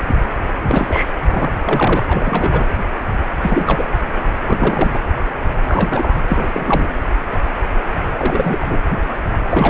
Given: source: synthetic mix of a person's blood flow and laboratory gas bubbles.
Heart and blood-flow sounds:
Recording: Doppler ultrasound of blood flow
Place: precordium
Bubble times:
0.67-1.14 s: bubbles
1.30-1.51 s: bubbles
1.59-2.03 s: bubbles
2.08-2.65 s: bubbles
3.41-3.83 s: bubbles
4.45-4.98 s: bubbles
5.67-6.19 s: bubbles
6.27-6.50 s: bubbles
6.52-6.88 s: bubbles
8.18-8.78 s: bubbles
9.51-9.70 s: bubbles
From the record:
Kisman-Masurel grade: 333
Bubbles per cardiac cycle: rolling drumbeat, 9 or more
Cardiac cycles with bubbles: 50 to 99%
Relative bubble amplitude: loud (0.450 to 0.775)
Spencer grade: 3 (all of the cardiac periods contain showers or single bubble signals, but not dominating or overriding the cardiac motion signals)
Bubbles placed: anywhere in the cardiac cycle

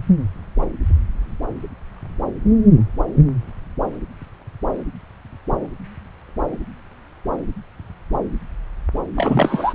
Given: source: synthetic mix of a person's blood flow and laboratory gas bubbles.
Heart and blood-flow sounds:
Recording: Doppler ultrasound of blood flow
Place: subclavian vein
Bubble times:
9.16-9.74 s: bubbles
From the record:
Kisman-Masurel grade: 213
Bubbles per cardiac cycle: several, 3 to 8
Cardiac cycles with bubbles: 1 to 10%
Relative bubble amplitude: loud (0.450 to 0.775)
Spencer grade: 1 (occasional bubble signal discernible with the cardiac motion signal, with majority of cardiac periods free of bubbles)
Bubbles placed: anywhere in the cardiac cycle

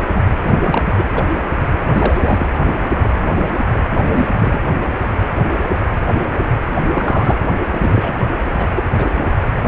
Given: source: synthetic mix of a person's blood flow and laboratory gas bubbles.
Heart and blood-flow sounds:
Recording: Doppler ultrasound of blood flow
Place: precordium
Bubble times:
0.43-1.05 s: bubbles
1.10-1.24 s: bubbles
1.92-2.50 s: bubbles
3.92-4.28 s: bubbles
4.39-4.59 s: bubbles
6.92-7.38 s: bubbles
7.72-8.16 s: bubbles
8.56-8.67 s: bubbles
8.75-8.84 s: bubbles
8.98-9.07 s: bubbles
9.58-9.68 s: bubbles
From the record:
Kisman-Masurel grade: 222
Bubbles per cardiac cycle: several, 3 to 8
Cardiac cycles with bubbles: 10 to 50%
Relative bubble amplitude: moderate (0.250 to 0.450)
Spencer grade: 2 (many but less than half of the cardiac periods contain bubble signals, singularly or in groups)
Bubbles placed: anywhere in the cardiac cycle

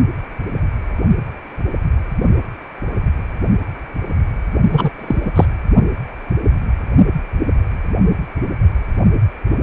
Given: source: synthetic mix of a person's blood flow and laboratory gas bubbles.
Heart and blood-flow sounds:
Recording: Doppler ultrasound of blood flow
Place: precordium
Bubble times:
4.72-4.90 s: bubbles
4.98-5.33 s: bubbles
5.35-5.46 s: bubbles
From the record:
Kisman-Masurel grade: 223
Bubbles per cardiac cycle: several, 3 to 8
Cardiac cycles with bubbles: 10 to 50%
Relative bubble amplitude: loud (0.450 to 0.775)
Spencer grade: 2 (many but less than half of the cardiac periods contain bubble signals, singularly or in groups)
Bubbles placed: only in the low amplitude regions of the cardiac cycle

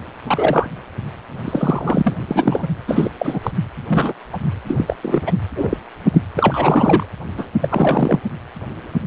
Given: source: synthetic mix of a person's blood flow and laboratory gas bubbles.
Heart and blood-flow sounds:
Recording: Doppler ultrasound of blood flow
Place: precordium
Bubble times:
0.27-0.69 s: bubbles
1.45-2.13 s: bubbles
2.27-2.67 s: bubbles
2.88-3.11 s: bubbles
3.18-3.39 s: bubbles
3.43-3.51 s: bubbles
3.89-4.14 s: bubbles
4.33-4.38 s: bubbles
4.68-4.96 s: bubbles
5.02-5.21 s: bubbles
5.26-5.33 s: bubbles
5.55-5.77 s: bubbles
6.12-6.21 s: bubbles
6.37-7.06 s: bubbles
7.38-7.46 s: bubbles
7.62-8.20 s: bubbles
From the record:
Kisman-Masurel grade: 243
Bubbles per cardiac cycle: several, 3 to 8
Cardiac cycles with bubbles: 100%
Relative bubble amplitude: loud (0.450 to 0.775)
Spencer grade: 3 (all of the cardiac periods contain showers or single bubble signals, but not dominating or overriding the cardiac motion signals)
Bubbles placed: anywhere in the cardiac cycle

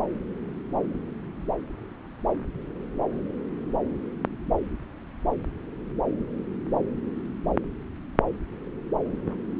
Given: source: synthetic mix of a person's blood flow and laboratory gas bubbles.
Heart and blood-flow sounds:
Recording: Doppler ultrasound of blood flow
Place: subclavian vein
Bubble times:
no bubbles
From the record:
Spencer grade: 0 (complete lack of bubble signals)

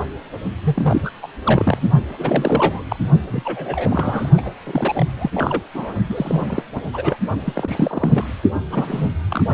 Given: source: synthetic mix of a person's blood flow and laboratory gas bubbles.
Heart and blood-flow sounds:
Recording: Doppler ultrasound of blood flow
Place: precordium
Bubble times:
0.64-1.10 s: bubbles
1.22-1.26 s: bubbles
1.45-1.90 s: bubbles
2.09-2.85 s: bubbles
2.88-2.96 s: bubbles
3.29-4.29 s: bubbles
4.37-4.51 s: bubbles
4.63-5.06 s: bubbles
5.19-5.30 s: bubbles
5.34-5.62 s: bubbles
5.74-5.94 s: bubbles
6.09-6.63 s: bubbles
6.74-6.81 s: bubbles
6.93-7.17 s: bubbles
7.45-8.25 s: bubbles
8.54-8.61 s: bubbles
8.71-9.08 s: bubbles
9.29-9.44 s: bubbles
From the record:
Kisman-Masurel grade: 342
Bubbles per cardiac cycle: rolling drumbeat, 9 or more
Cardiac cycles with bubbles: 100%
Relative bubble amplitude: moderate (0.250 to 0.450)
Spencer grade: 3 (all of the cardiac periods contain showers or single bubble signals, but not dominating or overriding the cardiac motion signals)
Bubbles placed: only in the low amplitude regions of the cardiac cycle

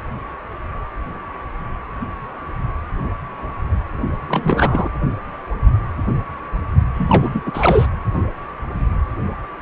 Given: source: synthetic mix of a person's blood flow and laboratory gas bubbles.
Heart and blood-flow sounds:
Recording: Doppler ultrasound of blood flow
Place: precordium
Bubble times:
4.28-4.89 s: bubbles
6.94-7.42 s: bubbles
7.46-7.87 s: bubbles
From the record:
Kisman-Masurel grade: 223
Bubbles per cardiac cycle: several, 3 to 8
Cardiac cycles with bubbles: 10 to 50%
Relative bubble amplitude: loud (0.450 to 0.775)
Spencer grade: 2 (many but less than half of the cardiac periods contain bubble signals, singularly or in groups)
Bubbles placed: anywhere in the cardiac cycle

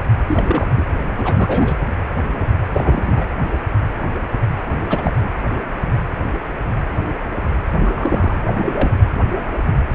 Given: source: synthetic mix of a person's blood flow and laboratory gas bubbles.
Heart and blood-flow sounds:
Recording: Doppler ultrasound of blood flow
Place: precordium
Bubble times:
0.28-0.66 s: bubbles
0.77-0.86 s: bubbles
1.16-1.78 s: bubbles
2.74-3.25 s: bubbles
4.89-5.12 s: bubbles
7.85-8.38 s: bubbles
8.47-8.96 s: bubbles
9.91-9.95 s: bubbles
From the record:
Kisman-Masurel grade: 222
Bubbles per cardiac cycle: several, 3 to 8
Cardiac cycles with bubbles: 10 to 50%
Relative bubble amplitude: moderate (0.250 to 0.450)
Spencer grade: 2 (many but less than half of the cardiac periods contain bubble signals, singularly or in groups)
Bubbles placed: anywhere in the cardiac cycle

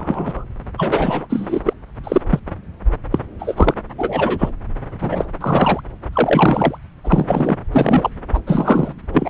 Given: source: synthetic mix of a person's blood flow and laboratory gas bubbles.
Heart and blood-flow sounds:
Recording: Doppler ultrasound of blood flow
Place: subclavian vein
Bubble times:
0.00-0.44 s: bubbles
0.78-1.25 s: bubbles
1.29-1.60 s: bubbles
1.65-1.73 s: bubbles
2.03-2.21 s: bubbles
2.29-2.40 s: bubbles
3.11-3.19 s: bubbles
3.39-3.74 s: bubbles
3.98-4.50 s: bubbles
5.00-5.26 s: bubbles
5.41-5.81 s: bubbles
6.12-6.77 s: bubbles
7.04-7.56 s: bubbles
7.72-8.10 s: bubbles
8.34-8.40 s: bubbles
8.47-8.94 s: bubbles
9.14-9.30 s: bubbles
From the record:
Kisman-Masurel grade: 243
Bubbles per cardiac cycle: several, 3 to 8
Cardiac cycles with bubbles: 100%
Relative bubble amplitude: loud (0.450 to 0.775)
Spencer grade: 3 (all of the cardiac periods contain showers or single bubble signals, but not dominating or overriding the cardiac motion signals)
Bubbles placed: anywhere in the cardiac cycle

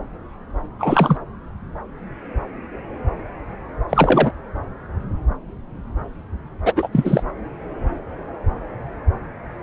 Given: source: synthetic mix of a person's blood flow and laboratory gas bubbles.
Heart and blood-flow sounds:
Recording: Doppler ultrasound of blood flow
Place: subclavian vein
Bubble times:
0.78-1.17 s: bubbles
3.89-4.32 s: bubbles
6.64-6.73 s: bubbles
6.75-6.88 s: bubbles
6.92-7.23 s: bubbles
From the record:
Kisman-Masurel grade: 223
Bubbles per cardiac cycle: several, 3 to 8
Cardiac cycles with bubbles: 10 to 50%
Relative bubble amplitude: loud (0.450 to 0.775)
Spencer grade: 2 (many but less than half of the cardiac periods contain bubble signals, singularly or in groups)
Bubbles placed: anywhere in the cardiac cycle

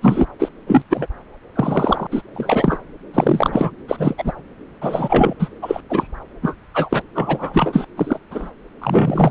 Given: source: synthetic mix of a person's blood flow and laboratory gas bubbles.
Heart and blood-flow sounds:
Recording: Doppler ultrasound of blood flow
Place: subclavian vein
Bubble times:
0.01-0.27 s: bubbles
0.39-0.49 s: bubbles
0.67-0.83 s: bubbles
0.90-1.06 s: bubbles
1.55-2.07 s: bubbles
2.11-2.22 s: bubbles
2.33-2.80 s: bubbles
3.13-3.71 s: bubbles
3.88-4.14 s: bubbles
4.17-4.32 s: bubbles
4.81-5.34 s: bubbles
5.39-5.49 s: bubbles
5.62-5.81 s: bubbles
5.89-6.07 s: bubbles
6.42-6.54 s: bubbles
6.74-7.02 s: bubbles
7.15-7.85 s: bubbles
7.97-8.18 s: bubbles
8.31-8.51 s: bubbles
8.81-9.31 s: bubbles
From the record:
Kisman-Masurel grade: 243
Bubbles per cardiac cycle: several, 3 to 8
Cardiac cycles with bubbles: 100%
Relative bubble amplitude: loud (0.450 to 0.775)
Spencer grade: 3 (all of the cardiac periods contain showers or single bubble signals, but not dominating or overriding the cardiac motion signals)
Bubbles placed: anywhere in the cardiac cycle

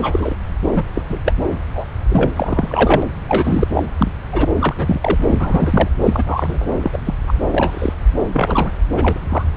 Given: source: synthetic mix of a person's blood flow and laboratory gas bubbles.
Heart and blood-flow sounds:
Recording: Doppler ultrasound of blood flow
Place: subclavian vein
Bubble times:
0.00-0.36 s: bubbles
0.76-0.83 s: bubbles
0.95-1.03 s: bubbles
1.09-1.20 s: bubbles
1.25-1.32 s: bubbles
1.74-1.88 s: bubbles
2.08-2.30 s: bubbles
2.36-3.08 s: bubbles
3.28-3.67 s: bubbles
3.70-3.83 s: bubbles
3.98-4.13 s: bubbles
4.32-4.48 s: bubbles
4.59-4.74 s: bubbles
4.76-5.17 s: bubbles
5.27-5.88 s: bubbles
6.00-6.66 s: bubbles
6.80-6.99 s: bubbles
7.04-7.14 s: bubbles
7.27-7.34 s: bubbles
7.50-7.93 s: bubbles
8.32-8.71 s: bubbles
8.92-9.19 s: bubbles
9.29-9.43 s: bubbles
From the record:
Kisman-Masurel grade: 243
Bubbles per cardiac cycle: several, 3 to 8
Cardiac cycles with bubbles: 100%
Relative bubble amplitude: loud (0.450 to 0.775)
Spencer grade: 3 (all of the cardiac periods contain showers or single bubble signals, but not dominating or overriding the cardiac motion signals)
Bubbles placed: anywhere in the cardiac cycle

